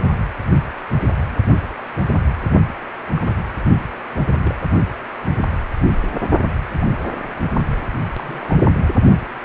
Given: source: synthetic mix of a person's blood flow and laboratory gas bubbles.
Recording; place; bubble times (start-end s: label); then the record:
Doppler ultrasound of blood flow; precordium
3.16-3.21 s: bubbles
3.25-3.34 s: bubbles
4.39-4.55 s: bubbles
6.81-6.86 s: bubbles
8.16-8.55 s: bubbles
From the record:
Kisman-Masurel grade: 121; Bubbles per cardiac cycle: 1 to 2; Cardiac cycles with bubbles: 10 to 50%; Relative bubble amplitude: barely perceptible (0.100 to 0.250); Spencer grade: 2 (many but less than half of the cardiac periods contain bubble signals, singularly or in groups); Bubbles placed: only in the low amplitude regions of the cardiac cycle